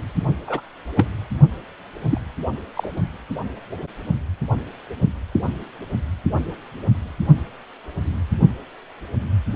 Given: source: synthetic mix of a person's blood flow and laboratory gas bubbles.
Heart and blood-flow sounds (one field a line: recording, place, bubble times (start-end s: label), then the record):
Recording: Doppler ultrasound of blood flow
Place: precordium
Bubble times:
0.47-0.60 s: bubbles
0.97-1.07 s: bubbles
2.09-2.21 s: bubbles
2.75-2.89 s: bubbles
From the record:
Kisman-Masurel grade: 122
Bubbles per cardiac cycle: 1 to 2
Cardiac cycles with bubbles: 10 to 50%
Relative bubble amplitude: moderate (0.250 to 0.450)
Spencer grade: 2 (many but less than half of the cardiac periods contain bubble signals, singularly or in groups)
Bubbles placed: only in the low amplitude regions of the cardiac cycle